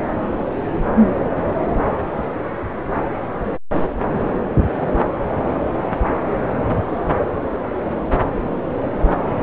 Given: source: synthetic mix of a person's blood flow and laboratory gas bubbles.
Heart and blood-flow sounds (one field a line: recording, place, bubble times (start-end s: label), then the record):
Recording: Doppler ultrasound of blood flow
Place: subclavian vein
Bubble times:
no bubbles
From the record:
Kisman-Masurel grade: 000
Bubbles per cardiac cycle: 0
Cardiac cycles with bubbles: 0%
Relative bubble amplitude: no bubbles discernible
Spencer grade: 0 (complete lack of bubble signals)